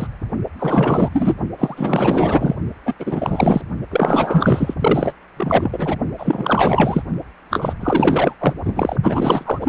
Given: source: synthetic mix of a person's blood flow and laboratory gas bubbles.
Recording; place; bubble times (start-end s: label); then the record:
Doppler ultrasound of blood flow; precordium
0.00-0.08 s: bubbles
0.59-1.09 s: bubbles
1.13-1.35 s: bubbles
1.58-2.56 s: bubbles
2.85-2.94 s: bubbles
2.99-3.62 s: bubbles
3.91-4.74 s: bubbles
4.79-5.12 s: bubbles
5.37-5.96 s: bubbles
6.18-7.02 s: bubbles
7.50-7.73 s: bubbles
7.80-8.35 s: bubbles
8.39-8.54 s: bubbles
8.65-8.96 s: bubbles
9.03-9.59 s: bubbles
9.61-9.68 s: bubbles
From the record:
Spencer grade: 4 (maximum detectable bubble signal sounding continuously throughout systole and diastole of every cardiac period, and overriding the amplitude of the normal cardiac signals); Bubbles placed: only in the low amplitude regions of the cardiac cycle